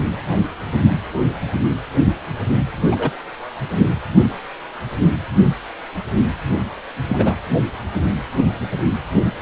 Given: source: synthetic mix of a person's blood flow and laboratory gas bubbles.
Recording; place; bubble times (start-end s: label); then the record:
Doppler ultrasound of blood flow; precordium
2.91-2.96 s: bubbles
2.98-3.10 s: bubbles
7.09-7.35 s: bubbles
From the record:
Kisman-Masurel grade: 123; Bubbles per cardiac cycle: 1 to 2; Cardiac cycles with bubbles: 10 to 50%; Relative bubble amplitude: loud (0.450 to 0.775); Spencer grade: 2 (many but less than half of the cardiac periods contain bubble signals, singularly or in groups); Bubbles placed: anywhere in the cardiac cycle